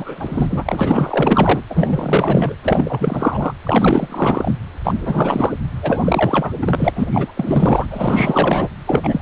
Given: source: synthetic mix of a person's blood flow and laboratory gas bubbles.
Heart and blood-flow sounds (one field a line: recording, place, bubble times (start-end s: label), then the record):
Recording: Doppler ultrasound of blood flow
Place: precordium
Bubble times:
0.00-1.62 s: bubbles
1.70-2.54 s: bubbles
2.62-3.53 s: bubbles
3.64-4.54 s: bubbles
4.83-5.59 s: bubbles
5.82-6.53 s: bubbles
6.62-6.91 s: bubbles
6.95-7.08 s: bubbles
7.12-7.33 s: bubbles
7.37-7.85 s: bubbles
7.90-8.68 s: bubbles
8.87-9.22 s: bubbles
From the record:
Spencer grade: 4 (maximum detectable bubble signal sounding continuously throughout systole and diastole of every cardiac period, and overriding the amplitude of the normal cardiac signals)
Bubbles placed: anywhere in the cardiac cycle